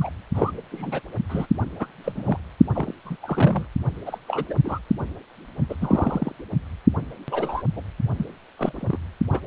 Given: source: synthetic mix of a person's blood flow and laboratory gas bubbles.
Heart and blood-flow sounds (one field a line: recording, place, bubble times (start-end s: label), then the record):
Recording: Doppler ultrasound of blood flow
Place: precordium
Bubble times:
0.00-0.09 s: bubbles
0.34-0.52 s: bubbles
0.72-1.01 s: bubbles
1.29-1.46 s: bubbles
1.79-1.86 s: bubbles
2.04-2.38 s: bubbles
2.73-2.93 s: bubbles
3.05-3.16 s: bubbles
3.22-3.66 s: bubbles
4.06-4.18 s: bubbles
4.28-4.46 s: bubbles
4.49-4.55 s: bubbles
4.64-4.79 s: bubbles
5.69-5.75 s: bubbles
5.81-6.32 s: bubbles
7.28-7.63 s: bubbles
7.76-7.82 s: bubbles
8.16-8.25 s: bubbles
8.58-8.97 s: bubbles
9.32-9.40 s: bubbles
From the record:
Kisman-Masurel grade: 242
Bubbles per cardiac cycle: several, 3 to 8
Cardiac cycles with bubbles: 100%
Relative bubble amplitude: moderate (0.250 to 0.450)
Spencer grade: 3 (all of the cardiac periods contain showers or single bubble signals, but not dominating or overriding the cardiac motion signals)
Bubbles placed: anywhere in the cardiac cycle